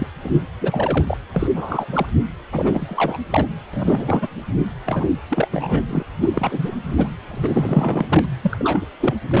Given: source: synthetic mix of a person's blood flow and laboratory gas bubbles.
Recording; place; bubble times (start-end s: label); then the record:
Doppler ultrasound of blood flow; precordium
0.00-0.07 s: bubbles
0.23-0.44 s: bubbles
0.61-1.17 s: bubbles
1.33-1.47 s: bubbles
1.56-2.06 s: bubbles
2.52-3.18 s: bubbles
3.31-3.47 s: bubbles
3.73-4.28 s: bubbles
4.86-5.10 s: bubbles
5.29-5.48 s: bubbles
5.51-5.82 s: bubbles
5.88-6.03 s: bubbles
6.21-6.29 s: bubbles
6.33-7.08 s: bubbles
7.23-8.05 s: bubbles
8.08-8.25 s: bubbles
8.41-8.88 s: bubbles
9.00-9.15 s: bubbles
9.30-9.40 s: bubbles
From the record:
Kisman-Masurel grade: 342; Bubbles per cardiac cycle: rolling drumbeat, 9 or more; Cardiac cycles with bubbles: 100%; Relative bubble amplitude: moderate (0.250 to 0.450); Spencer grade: 3 (all of the cardiac periods contain showers or single bubble signals, but not dominating or overriding the cardiac motion signals); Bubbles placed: anywhere in the cardiac cycle